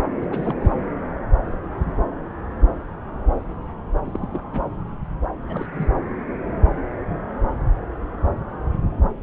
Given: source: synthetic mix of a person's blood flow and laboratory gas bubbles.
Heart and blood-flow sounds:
Doppler ultrasound of blood flow; subclavian vein
0.19-0.27 s: bubbles
0.31-0.54 s: bubbles
0.60-0.73 s: bubbles
4.06-4.43 s: bubbles
4.53-4.61 s: bubbles
5.49-5.65 s: bubbles
5.73-5.89 s: bubbles
From the record:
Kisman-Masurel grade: 221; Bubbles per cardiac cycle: several, 3 to 8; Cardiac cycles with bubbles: 10 to 50%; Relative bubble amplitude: barely perceptible (0.100 to 0.250); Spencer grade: 2 (many but less than half of the cardiac periods contain bubble signals, singularly or in groups); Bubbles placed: anywhere in the cardiac cycle

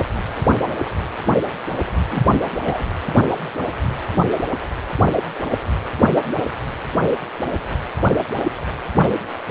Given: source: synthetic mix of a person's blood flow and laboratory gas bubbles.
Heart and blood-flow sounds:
Doppler ultrasound of blood flow; precordium
2.10-2.22 s: bubbles
2.66-2.84 s: bubbles
From the record:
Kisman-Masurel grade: 122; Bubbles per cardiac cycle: 1 to 2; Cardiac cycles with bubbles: 10 to 50%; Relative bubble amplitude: moderate (0.250 to 0.450); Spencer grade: 2 (many but less than half of the cardiac periods contain bubble signals, singularly or in groups); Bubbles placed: anywhere in the cardiac cycle

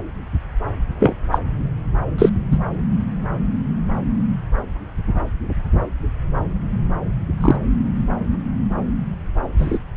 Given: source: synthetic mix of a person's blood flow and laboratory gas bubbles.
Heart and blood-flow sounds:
Doppler ultrasound of blood flow; subclavian vein
0.99-1.15 s: bubbles
1.31-1.39 s: bubbles
2.18-2.29 s: bubbles
2.51-2.58 s: bubbles
7.41-7.56 s: bubbles
9.59-9.79 s: bubbles
From the record:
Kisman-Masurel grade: 123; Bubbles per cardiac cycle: 1 to 2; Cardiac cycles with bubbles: 10 to 50%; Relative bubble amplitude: loud (0.450 to 0.775); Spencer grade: 2 (many but less than half of the cardiac periods contain bubble signals, singularly or in groups); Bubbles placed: anywhere in the cardiac cycle

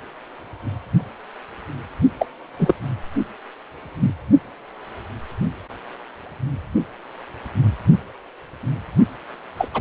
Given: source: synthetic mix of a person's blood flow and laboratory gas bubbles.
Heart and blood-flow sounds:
Doppler ultrasound of blood flow; precordium
2.19-2.26 s: bubbles
2.58-2.74 s: bubbles
4.00-4.13 s: bubbles
9.57-9.68 s: bubbles
9.73-9.81 s: bubbles
From the record:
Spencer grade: 2 (many but less than half of the cardiac periods contain bubble signals, singularly or in groups); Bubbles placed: only in the low amplitude regions of the cardiac cycle

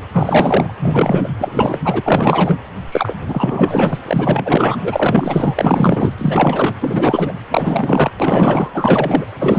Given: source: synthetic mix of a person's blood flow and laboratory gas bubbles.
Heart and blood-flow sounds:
Doppler ultrasound of blood flow; precordium
0.12-0.74 s: bubbles
0.79-1.28 s: bubbles
1.40-1.80 s: bubbles
1.84-2.58 s: bubbles
2.92-3.14 s: bubbles
3.27-3.98 s: bubbles
4.06-4.77 s: bubbles
4.83-6.15 s: bubbles
6.17-6.74 s: bubbles
6.81-7.36 s: bubbles
7.51-8.11 s: bubbles
8.19-8.70 s: bubbles
8.74-9.25 s: bubbles
9.39-9.59 s: bubbles
From the record:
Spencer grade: 4 (maximum detectable bubble signal sounding continuously throughout systole and diastole of every cardiac period, and overriding the amplitude of the normal cardiac signals); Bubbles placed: anywhere in the cardiac cycle

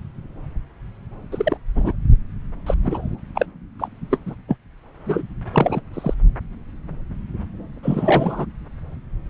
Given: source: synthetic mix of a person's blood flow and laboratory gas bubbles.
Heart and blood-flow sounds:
Doppler ultrasound of blood flow; subclavian vein
1.32-1.57 s: bubbles
1.76-1.93 s: bubbles
2.66-2.75 s: bubbles
2.83-3.20 s: bubbles
3.35-3.46 s: bubbles
3.79-3.88 s: bubbles
4.11-4.18 s: bubbles
4.26-4.35 s: bubbles
4.48-4.56 s: bubbles
5.05-5.23 s: bubbles
5.52-5.81 s: bubbles
5.94-6.15 s: bubbles
7.83-8.46 s: bubbles
From the record:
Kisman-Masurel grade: 222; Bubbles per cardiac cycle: several, 3 to 8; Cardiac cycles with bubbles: 10 to 50%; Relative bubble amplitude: moderate (0.250 to 0.450); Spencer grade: 2 (many but less than half of the cardiac periods contain bubble signals, singularly or in groups); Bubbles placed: anywhere in the cardiac cycle

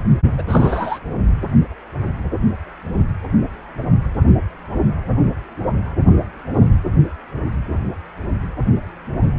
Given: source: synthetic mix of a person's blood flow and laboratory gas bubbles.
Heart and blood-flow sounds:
Doppler ultrasound of blood flow; precordium
0.38-0.43 s: bubbles
0.47-0.99 s: bubbles
From the record:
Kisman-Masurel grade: 212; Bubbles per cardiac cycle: several, 3 to 8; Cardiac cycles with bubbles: 1 to 10%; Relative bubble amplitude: moderate (0.250 to 0.450); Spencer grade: 1 (occasional bubble signal discernible with the cardiac motion signal, with majority of cardiac periods free of bubbles); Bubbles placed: only in the low amplitude regions of the cardiac cycle

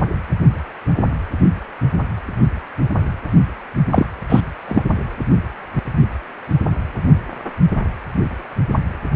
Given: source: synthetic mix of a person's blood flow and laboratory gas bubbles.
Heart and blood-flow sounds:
Doppler ultrasound of blood flow; precordium
3.91-4.06 s: bubbles
4.29-4.42 s: bubbles
4.67-4.83 s: bubbles
From the record:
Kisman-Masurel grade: 223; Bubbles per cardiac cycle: several, 3 to 8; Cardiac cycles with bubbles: 10 to 50%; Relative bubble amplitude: loud (0.450 to 0.775); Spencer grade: 2 (many but less than half of the cardiac periods contain bubble signals, singularly or in groups); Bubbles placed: only in the low amplitude regions of the cardiac cycle

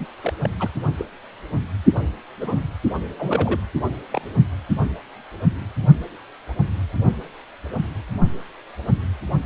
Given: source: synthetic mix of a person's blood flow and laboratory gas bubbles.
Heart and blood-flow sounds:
Doppler ultrasound of blood flow; precordium
0.00-0.05 s: bubbles
0.22-0.33 s: bubbles
0.42-0.50 s: bubbles
0.59-0.70 s: bubbles
0.98-1.05 s: bubbles
2.40-2.61 s: bubbles
3.19-3.60 s: bubbles
4.12-4.22 s: bubbles
From the record:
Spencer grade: 2 (many but less than half of the cardiac periods contain bubble signals, singularly or in groups); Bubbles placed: only in the low amplitude regions of the cardiac cycle

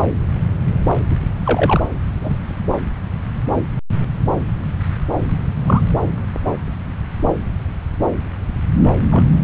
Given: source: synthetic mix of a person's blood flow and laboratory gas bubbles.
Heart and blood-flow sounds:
Doppler ultrasound of blood flow; subclavian vein
1.10-1.16 s: bubbles
1.44-1.81 s: bubbles
2.22-2.37 s: bubbles
5.67-5.84 s: bubbles
9.11-9.24 s: bubbles
From the record:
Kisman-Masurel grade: 123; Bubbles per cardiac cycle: 1 to 2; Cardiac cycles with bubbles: 10 to 50%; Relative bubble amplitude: loud (0.450 to 0.775); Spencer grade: 2 (many but less than half of the cardiac periods contain bubble signals, singularly or in groups); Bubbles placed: anywhere in the cardiac cycle

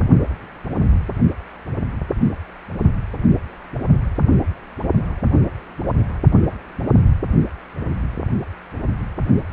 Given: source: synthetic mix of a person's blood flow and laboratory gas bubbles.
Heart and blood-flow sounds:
Doppler ultrasound of blood flow; precordium
no bubbles
From the record:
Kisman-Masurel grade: 000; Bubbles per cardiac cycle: 0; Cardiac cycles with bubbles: 0%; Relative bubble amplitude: no bubbles discernible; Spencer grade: 0 (complete lack of bubble signals)

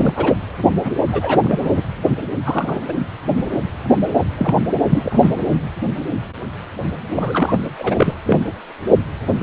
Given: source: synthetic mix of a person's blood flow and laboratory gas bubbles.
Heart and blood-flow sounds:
Doppler ultrasound of blood flow; precordium
0.00-0.34 s: bubbles
0.84-0.93 s: bubbles
1.11-1.40 s: bubbles
1.43-1.82 s: bubbles
2.44-2.94 s: bubbles
4.38-4.55 s: bubbles
4.90-5.33 s: bubbles
7.16-7.59 s: bubbles
7.79-8.14 s: bubbles
8.26-8.39 s: bubbles
From the record:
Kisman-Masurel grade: 233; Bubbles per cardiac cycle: several, 3 to 8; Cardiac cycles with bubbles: 50 to 99%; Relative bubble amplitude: loud (0.450 to 0.775); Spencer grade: 3 (all of the cardiac periods contain showers or single bubble signals, but not dominating or overriding the cardiac motion signals); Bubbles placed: anywhere in the cardiac cycle

